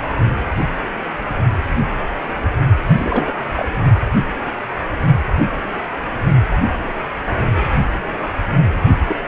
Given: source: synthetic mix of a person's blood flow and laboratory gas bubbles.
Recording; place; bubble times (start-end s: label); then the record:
Doppler ultrasound of blood flow; precordium
2.86-3.32 s: bubbles
3.55-3.69 s: bubbles
9.08-9.16 s: bubbles
From the record:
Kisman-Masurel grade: 222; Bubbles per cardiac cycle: several, 3 to 8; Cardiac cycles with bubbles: 10 to 50%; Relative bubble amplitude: moderate (0.250 to 0.450); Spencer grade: 2 (many but less than half of the cardiac periods contain bubble signals, singularly or in groups); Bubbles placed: only in the low amplitude regions of the cardiac cycle